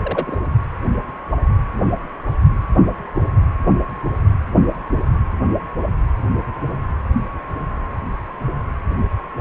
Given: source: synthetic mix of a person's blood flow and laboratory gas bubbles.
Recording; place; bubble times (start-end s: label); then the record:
Doppler ultrasound of blood flow; precordium
0.04-0.36 s: bubbles
From the record:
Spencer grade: 1 (occasional bubble signal discernible with the cardiac motion signal, with majority of cardiac periods free of bubbles); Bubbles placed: anywhere in the cardiac cycle